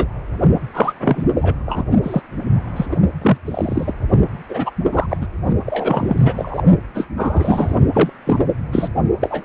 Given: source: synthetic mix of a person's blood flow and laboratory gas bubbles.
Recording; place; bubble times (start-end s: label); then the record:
Doppler ultrasound of blood flow; precordium
0.00-0.08 s: bubbles
0.73-0.93 s: bubbles
0.99-1.24 s: bubbles
1.34-1.55 s: bubbles
1.66-1.83 s: bubbles
2.03-2.21 s: bubbles
2.76-2.86 s: bubbles
2.91-2.97 s: bubbles
3.21-3.38 s: bubbles
3.46-3.93 s: bubbles
4.49-4.71 s: bubbles
4.92-5.06 s: bubbles
5.09-5.17 s: bubbles
5.21-5.27 s: bubbles
5.65-6.62 s: bubbles
6.94-7.08 s: bubbles
7.17-7.77 s: bubbles
7.93-8.10 s: bubbles
8.27-8.39 s: bubbles
8.72-8.88 s: bubbles
9.21-9.43 s: bubbles
From the record:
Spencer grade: 3 (all of the cardiac periods contain showers or single bubble signals, but not dominating or overriding the cardiac motion signals); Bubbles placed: only in the low amplitude regions of the cardiac cycle